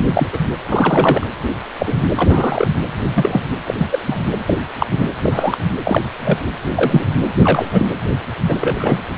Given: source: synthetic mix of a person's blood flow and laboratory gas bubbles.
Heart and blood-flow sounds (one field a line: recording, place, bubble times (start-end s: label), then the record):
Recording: Doppler ultrasound of blood flow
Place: precordium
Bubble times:
0.00-0.06 s: bubbles
0.13-0.27 s: bubbles
0.32-0.37 s: bubbles
0.68-1.26 s: bubbles
1.78-1.95 s: bubbles
1.97-2.08 s: bubbles
2.16-2.68 s: bubbles
3.14-3.42 s: bubbles
3.65-3.74 s: bubbles
3.77-3.87 s: bubbles
3.92-3.99 s: bubbles
4.06-4.17 s: bubbles
4.46-4.54 s: bubbles
4.79-4.87 s: bubbles
4.92-5.06 s: bubbles
5.21-5.58 s: bubbles
5.83-6.02 s: bubbles
6.25-6.38 s: bubbles
6.75-7.04 s: bubbles
7.42-7.87 s: bubbles
8.48-9.04 s: bubbles
From the record:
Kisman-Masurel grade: 243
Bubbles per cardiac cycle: several, 3 to 8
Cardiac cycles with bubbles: 100%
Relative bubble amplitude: loud (0.450 to 0.775)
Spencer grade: 3 (all of the cardiac periods contain showers or single bubble signals, but not dominating or overriding the cardiac motion signals)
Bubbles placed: anywhere in the cardiac cycle